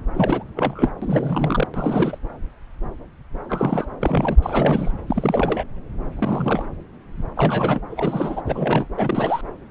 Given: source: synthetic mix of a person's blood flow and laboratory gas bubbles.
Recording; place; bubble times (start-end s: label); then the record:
Doppler ultrasound of blood flow; subclavian vein
0.14-0.44 s: bubbles
0.55-0.90 s: bubbles
1.02-1.68 s: bubbles
1.74-2.19 s: bubbles
3.49-3.87 s: bubbles
4.00-4.37 s: bubbles
4.42-4.91 s: bubbles
5.07-5.65 s: bubbles
6.15-6.65 s: bubbles
7.35-7.82 s: bubbles
7.90-8.43 s: bubbles
8.46-8.86 s: bubbles
8.96-9.41 s: bubbles
From the record:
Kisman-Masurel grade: 333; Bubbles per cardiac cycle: rolling drumbeat, 9 or more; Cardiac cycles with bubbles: 50 to 99%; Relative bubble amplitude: loud (0.450 to 0.775); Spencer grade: 3 (all of the cardiac periods contain showers or single bubble signals, but not dominating or overriding the cardiac motion signals); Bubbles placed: anywhere in the cardiac cycle